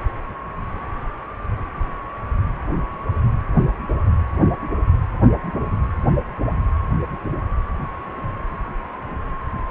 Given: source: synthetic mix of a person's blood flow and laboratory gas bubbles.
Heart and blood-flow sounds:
Doppler ultrasound of blood flow; precordium
no bubbles
From the record:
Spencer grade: 0 (complete lack of bubble signals)

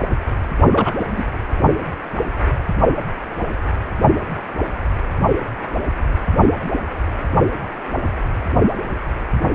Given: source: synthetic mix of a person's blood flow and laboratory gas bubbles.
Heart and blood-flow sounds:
Doppler ultrasound of blood flow; precordium
0.71-0.93 s: bubbles
0.99-1.04 s: bubbles
1.10-1.23 s: bubbles
From the record:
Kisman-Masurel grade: 213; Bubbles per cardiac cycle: several, 3 to 8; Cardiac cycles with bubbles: 1 to 10%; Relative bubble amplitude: loud (0.450 to 0.775); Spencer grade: 1 (occasional bubble signal discernible with the cardiac motion signal, with majority of cardiac periods free of bubbles); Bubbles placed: only in the low amplitude regions of the cardiac cycle

